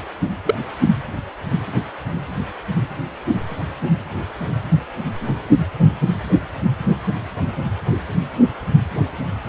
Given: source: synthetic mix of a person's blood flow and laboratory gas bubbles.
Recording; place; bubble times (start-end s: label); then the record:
Doppler ultrasound of blood flow; precordium
0.45-0.55 s: bubbles
From the record:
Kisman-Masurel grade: 112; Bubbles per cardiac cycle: 1 to 2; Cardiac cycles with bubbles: 1 to 10%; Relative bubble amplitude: moderate (0.250 to 0.450); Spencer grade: 1 (occasional bubble signal discernible with the cardiac motion signal, with majority of cardiac periods free of bubbles); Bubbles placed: anywhere in the cardiac cycle